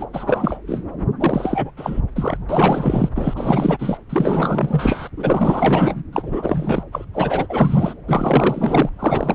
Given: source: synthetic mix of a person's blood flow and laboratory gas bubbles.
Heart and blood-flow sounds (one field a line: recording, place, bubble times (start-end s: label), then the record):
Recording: Doppler ultrasound of blood flow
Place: subclavian vein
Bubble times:
0.00-0.06 s: bubbles
0.13-0.59 s: bubbles
0.67-0.82 s: bubbles
1.19-1.71 s: bubbles
1.77-2.01 s: bubbles
2.15-2.38 s: bubbles
2.49-3.09 s: bubbles
3.15-3.98 s: bubbles
4.09-5.09 s: bubbles
5.17-6.03 s: bubbles
6.12-6.83 s: bubbles
6.92-7.05 s: bubbles
7.13-7.46 s: bubbles
7.49-7.94 s: bubbles
8.07-8.89 s: bubbles
8.99-9.34 s: bubbles
From the record:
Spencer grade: 4 (maximum detectable bubble signal sounding continuously throughout systole and diastole of every cardiac period, and overriding the amplitude of the normal cardiac signals)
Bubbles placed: anywhere in the cardiac cycle